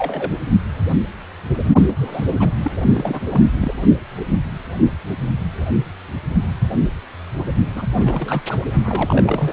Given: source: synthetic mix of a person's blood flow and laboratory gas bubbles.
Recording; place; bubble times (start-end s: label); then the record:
Doppler ultrasound of blood flow; precordium
0.00-0.31 s: bubbles
1.88-2.25 s: bubbles
2.36-2.52 s: bubbles
2.62-2.71 s: bubbles
2.88-3.41 s: bubbles
3.57-3.72 s: bubbles
7.75-7.87 s: bubbles
7.98-8.42 s: bubbles
8.46-8.59 s: bubbles
8.84-9.53 s: bubbles
From the record:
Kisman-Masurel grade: 332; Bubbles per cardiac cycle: rolling drumbeat, 9 or more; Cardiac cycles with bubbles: 50 to 99%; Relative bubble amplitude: moderate (0.250 to 0.450); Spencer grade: 3 (all of the cardiac periods contain showers or single bubble signals, but not dominating or overriding the cardiac motion signals); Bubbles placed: only in the low amplitude regions of the cardiac cycle